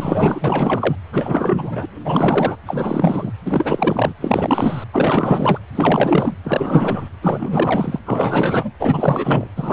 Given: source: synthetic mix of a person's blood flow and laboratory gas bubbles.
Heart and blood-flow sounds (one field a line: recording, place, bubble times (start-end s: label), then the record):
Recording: Doppler ultrasound of blood flow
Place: precordium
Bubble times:
0.00-0.95 s: bubbles
1.12-1.86 s: bubbles
2.00-2.57 s: bubbles
2.66-3.32 s: bubbles
3.43-4.13 s: bubbles
4.21-4.84 s: bubbles
4.92-5.58 s: bubbles
5.75-6.34 s: bubbles
6.44-7.09 s: bubbles
7.21-7.99 s: bubbles
8.05-8.71 s: bubbles
8.79-9.47 s: bubbles
9.56-9.73 s: bubbles
From the record:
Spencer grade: 4 (maximum detectable bubble signal sounding continuously throughout systole and diastole of every cardiac period, and overriding the amplitude of the normal cardiac signals)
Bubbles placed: anywhere in the cardiac cycle